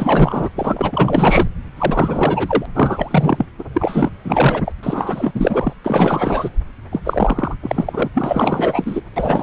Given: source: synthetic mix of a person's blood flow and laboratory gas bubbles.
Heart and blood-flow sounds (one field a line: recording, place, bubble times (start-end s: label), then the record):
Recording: Doppler ultrasound of blood flow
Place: subclavian vein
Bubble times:
0.00-0.49 s: bubbles
0.55-1.48 s: bubbles
1.77-2.66 s: bubbles
2.74-3.46 s: bubbles
3.58-3.65 s: bubbles
3.74-4.09 s: bubbles
4.24-4.72 s: bubbles
4.83-5.74 s: bubbles
5.84-6.50 s: bubbles
6.92-7.01 s: bubbles
7.04-7.55 s: bubbles
7.63-8.09 s: bubbles
8.13-9.00 s: bubbles
9.16-9.43 s: bubbles
From the record:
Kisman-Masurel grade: 444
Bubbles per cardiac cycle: continuous sound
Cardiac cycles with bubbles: 100%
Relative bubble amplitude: maximal (0.775 to 0.999)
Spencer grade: 4 (maximum detectable bubble signal sounding continuously throughout systole and diastole of every cardiac period, and overriding the amplitude of the normal cardiac signals)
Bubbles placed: anywhere in the cardiac cycle